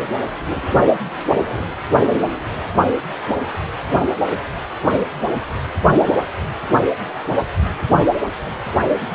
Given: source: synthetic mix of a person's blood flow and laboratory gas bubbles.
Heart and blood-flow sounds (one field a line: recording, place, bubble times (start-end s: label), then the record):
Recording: Doppler ultrasound of blood flow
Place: precordium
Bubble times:
no bubbles
From the record:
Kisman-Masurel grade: 000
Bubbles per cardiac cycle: 0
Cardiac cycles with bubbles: 0%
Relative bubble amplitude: no bubbles discernible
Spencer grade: 0 (complete lack of bubble signals)